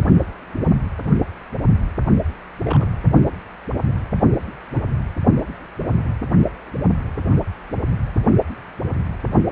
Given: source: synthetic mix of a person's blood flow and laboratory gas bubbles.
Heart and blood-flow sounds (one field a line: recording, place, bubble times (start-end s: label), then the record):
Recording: Doppler ultrasound of blood flow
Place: precordium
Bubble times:
2.65-2.86 s: bubbles
4.75-4.80 s: bubbles
From the record:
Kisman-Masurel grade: 121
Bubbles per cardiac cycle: 1 to 2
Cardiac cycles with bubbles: 10 to 50%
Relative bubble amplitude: barely perceptible (0.100 to 0.250)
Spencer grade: 2 (many but less than half of the cardiac periods contain bubble signals, singularly or in groups)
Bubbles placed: only in the low amplitude regions of the cardiac cycle